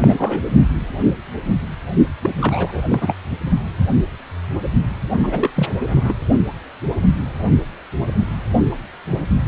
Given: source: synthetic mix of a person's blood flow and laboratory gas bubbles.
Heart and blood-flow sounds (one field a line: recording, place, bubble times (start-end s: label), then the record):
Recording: Doppler ultrasound of blood flow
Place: precordium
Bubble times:
0.00-0.41 s: bubbles
2.22-2.31 s: bubbles
2.39-2.81 s: bubbles
2.88-3.15 s: bubbles
5.17-5.51 s: bubbles
5.56-5.67 s: bubbles
5.79-6.13 s: bubbles
From the record:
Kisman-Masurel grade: 232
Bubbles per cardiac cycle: several, 3 to 8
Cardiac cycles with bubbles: 50 to 99%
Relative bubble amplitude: moderate (0.250 to 0.450)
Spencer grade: 3 (all of the cardiac periods contain showers or single bubble signals, but not dominating or overriding the cardiac motion signals)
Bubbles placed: only in the low amplitude regions of the cardiac cycle